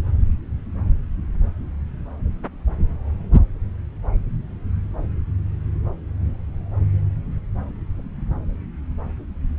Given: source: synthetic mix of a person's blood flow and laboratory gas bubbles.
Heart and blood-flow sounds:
Doppler ultrasound of blood flow; subclavian vein
no bubbles
From the record:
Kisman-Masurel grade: 000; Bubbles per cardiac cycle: 0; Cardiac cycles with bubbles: 0%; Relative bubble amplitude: no bubbles discernible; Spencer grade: 0 (complete lack of bubble signals)

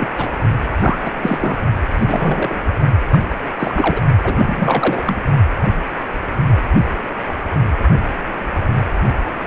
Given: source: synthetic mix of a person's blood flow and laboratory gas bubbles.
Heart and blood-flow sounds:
Doppler ultrasound of blood flow; precordium
0.00-0.09 s: bubbles
0.17-0.29 s: bubbles
0.74-1.59 s: bubbles
1.94-2.62 s: bubbles
3.11-3.22 s: bubbles
3.29-3.34 s: bubbles
3.59-4.01 s: bubbles
4.24-5.17 s: bubbles
From the record:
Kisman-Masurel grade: 332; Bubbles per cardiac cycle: rolling drumbeat, 9 or more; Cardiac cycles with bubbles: 50 to 99%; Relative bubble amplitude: moderate (0.250 to 0.450); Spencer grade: 3 (all of the cardiac periods contain showers or single bubble signals, but not dominating or overriding the cardiac motion signals); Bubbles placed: only in the low amplitude regions of the cardiac cycle

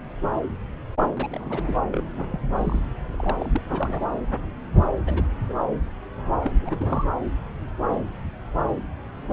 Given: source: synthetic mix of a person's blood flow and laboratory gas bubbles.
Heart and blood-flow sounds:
Doppler ultrasound of blood flow; subclavian vein
1.16-1.79 s: bubbles
1.93-2.04 s: bubbles
2.31-2.79 s: bubbles
3.11-3.61 s: bubbles
3.66-4.18 s: bubbles
5.06-5.35 s: bubbles
5.48-5.54 s: bubbles
6.43-7.06 s: bubbles
From the record:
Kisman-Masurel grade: 222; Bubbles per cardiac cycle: several, 3 to 8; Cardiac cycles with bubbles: 10 to 50%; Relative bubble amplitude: moderate (0.250 to 0.450); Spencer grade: 2 (many but less than half of the cardiac periods contain bubble signals, singularly or in groups); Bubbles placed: anywhere in the cardiac cycle

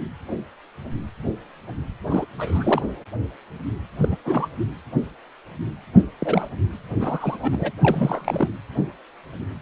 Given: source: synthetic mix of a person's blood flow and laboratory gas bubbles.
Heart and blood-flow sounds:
Doppler ultrasound of blood flow; precordium
2.09-2.25 s: bubbles
2.38-2.82 s: bubbles
4.02-4.08 s: bubbles
4.11-4.16 s: bubbles
4.25-4.48 s: bubbles
6.19-6.49 s: bubbles
7.00-7.71 s: bubbles
7.82-8.48 s: bubbles
From the record:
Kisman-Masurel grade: 222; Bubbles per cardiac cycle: several, 3 to 8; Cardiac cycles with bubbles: 10 to 50%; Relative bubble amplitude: moderate (0.250 to 0.450); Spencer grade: 2 (many but less than half of the cardiac periods contain bubble signals, singularly or in groups); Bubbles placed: anywhere in the cardiac cycle

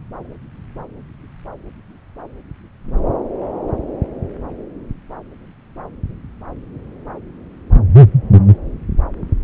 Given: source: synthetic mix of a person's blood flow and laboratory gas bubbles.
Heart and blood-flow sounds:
Doppler ultrasound of blood flow; subclavian vein
no bubbles
From the record:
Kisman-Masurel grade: 000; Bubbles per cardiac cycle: 0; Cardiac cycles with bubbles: 0%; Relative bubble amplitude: no bubbles discernible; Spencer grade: 0 (complete lack of bubble signals)

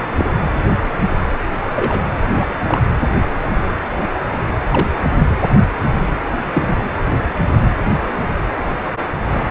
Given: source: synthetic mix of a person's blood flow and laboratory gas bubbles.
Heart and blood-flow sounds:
Doppler ultrasound of blood flow; precordium
0.17-0.26 s: bubbles
1.76-2.08 s: bubbles
2.31-2.57 s: bubbles
2.67-2.81 s: bubbles
4.70-4.88 s: bubbles
6.53-6.77 s: bubbles
From the record:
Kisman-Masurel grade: 122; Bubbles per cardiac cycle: 1 to 2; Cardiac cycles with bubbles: 10 to 50%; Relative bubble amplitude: moderate (0.250 to 0.450); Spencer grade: 2 (many but less than half of the cardiac periods contain bubble signals, singularly or in groups); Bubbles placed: anywhere in the cardiac cycle

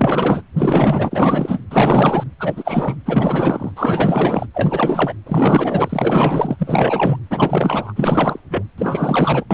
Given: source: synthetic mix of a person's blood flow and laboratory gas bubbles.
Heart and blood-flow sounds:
Doppler ultrasound of blood flow; precordium
0.00-0.42 s: bubbles
0.56-1.62 s: bubbles
1.71-2.24 s: bubbles
2.39-2.96 s: bubbles
3.06-3.71 s: bubbles
3.75-4.46 s: bubbles
4.54-5.13 s: bubbles
5.26-6.56 s: bubbles
6.58-7.19 s: bubbles
7.30-7.93 s: bubbles
7.96-8.39 s: bubbles
8.49-8.63 s: bubbles
8.78-9.44 s: bubbles
9.51-9.54 s: bubbles
From the record:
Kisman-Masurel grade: 444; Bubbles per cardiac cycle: continuous sound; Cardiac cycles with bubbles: 100%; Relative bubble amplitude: maximal (0.775 to 0.999); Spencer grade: 4 (maximum detectable bubble signal sounding continuously throughout systole and diastole of every cardiac period, and overriding the amplitude of the normal cardiac signals); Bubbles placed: anywhere in the cardiac cycle

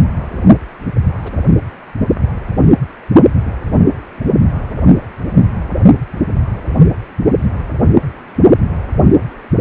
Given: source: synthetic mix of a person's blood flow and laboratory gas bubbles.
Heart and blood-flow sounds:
Doppler ultrasound of blood flow; precordium
1.23-1.32 s: bubbles
From the record:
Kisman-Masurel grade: 111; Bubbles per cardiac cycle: 1 to 2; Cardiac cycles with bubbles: 1 to 10%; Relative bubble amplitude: barely perceptible (0.100 to 0.250); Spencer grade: 1 (occasional bubble signal discernible with the cardiac motion signal, with majority of cardiac periods free of bubbles); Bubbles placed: only in the low amplitude regions of the cardiac cycle

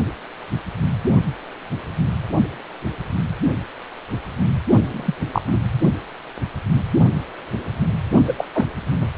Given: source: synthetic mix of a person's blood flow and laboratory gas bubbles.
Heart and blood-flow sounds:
Doppler ultrasound of blood flow; precordium
4.85-5.16 s: bubbles
5.32-5.42 s: bubbles
5.47-5.57 s: bubbles
8.27-8.35 s: bubbles
8.37-8.45 s: bubbles
8.53-8.66 s: bubbles
9.01-9.09 s: bubbles
From the record:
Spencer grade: 2 (many but less than half of the cardiac periods contain bubble signals, singularly or in groups); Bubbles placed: only in the low amplitude regions of the cardiac cycle

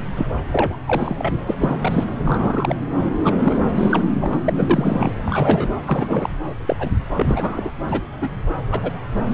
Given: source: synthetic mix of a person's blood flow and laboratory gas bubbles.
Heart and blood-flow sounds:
Doppler ultrasound of blood flow; subclavian vein
0.16-0.27 s: bubbles
0.51-0.77 s: bubbles
0.86-1.33 s: bubbles
1.46-1.55 s: bubbles
1.58-2.04 s: bubbles
2.19-2.75 s: bubbles
3.23-3.36 s: bubbles
3.44-3.57 s: bubbles
3.74-4.04 s: bubbles
4.21-4.41 s: bubbles
4.46-5.15 s: bubbles
5.26-5.68 s: bubbles
5.85-6.30 s: bubbles
6.67-6.76 s: bubbles
6.79-6.91 s: bubbles
7.16-7.72 s: bubbles
7.88-8.00 s: bubbles
8.21-8.29 s: bubbles
8.71-8.91 s: bubbles
9.29-9.33 s: bubbles
From the record:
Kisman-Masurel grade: 242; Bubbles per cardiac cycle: several, 3 to 8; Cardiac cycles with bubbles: 100%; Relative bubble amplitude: moderate (0.250 to 0.450); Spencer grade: 3 (all of the cardiac periods contain showers or single bubble signals, but not dominating or overriding the cardiac motion signals); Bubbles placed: anywhere in the cardiac cycle

